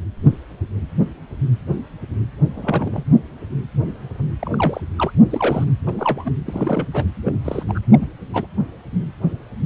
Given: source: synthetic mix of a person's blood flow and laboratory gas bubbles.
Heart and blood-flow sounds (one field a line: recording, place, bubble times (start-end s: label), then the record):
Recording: Doppler ultrasound of blood flow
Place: precordium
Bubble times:
2.55-3.03 s: bubbles
4.39-4.81 s: bubbles
4.98-5.12 s: bubbles
5.29-5.64 s: bubbles
5.67-5.71 s: bubbles
5.86-5.93 s: bubbles
5.99-6.31 s: bubbles
6.46-7.06 s: bubbles
7.25-7.32 s: bubbles
7.45-7.63 s: bubbles
7.68-7.79 s: bubbles
7.92-8.06 s: bubbles
8.33-8.46 s: bubbles
From the record:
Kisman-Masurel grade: 232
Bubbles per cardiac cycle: several, 3 to 8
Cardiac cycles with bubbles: 50 to 99%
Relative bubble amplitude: moderate (0.250 to 0.450)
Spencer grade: 3 (all of the cardiac periods contain showers or single bubble signals, but not dominating or overriding the cardiac motion signals)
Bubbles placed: anywhere in the cardiac cycle